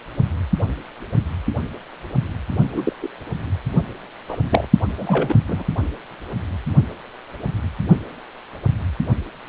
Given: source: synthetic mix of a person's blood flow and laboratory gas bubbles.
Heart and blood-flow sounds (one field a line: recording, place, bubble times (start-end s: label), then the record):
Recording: Doppler ultrasound of blood flow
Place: precordium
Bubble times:
2.73-2.92 s: bubbles
3.02-3.08 s: bubbles
4.29-4.37 s: bubbles
4.51-4.66 s: bubbles
4.98-5.35 s: bubbles
5.47-5.63 s: bubbles
From the record:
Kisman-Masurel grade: 222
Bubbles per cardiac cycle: several, 3 to 8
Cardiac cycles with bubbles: 10 to 50%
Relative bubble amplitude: moderate (0.250 to 0.450)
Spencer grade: 2 (many but less than half of the cardiac periods contain bubble signals, singularly or in groups)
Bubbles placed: only in the low amplitude regions of the cardiac cycle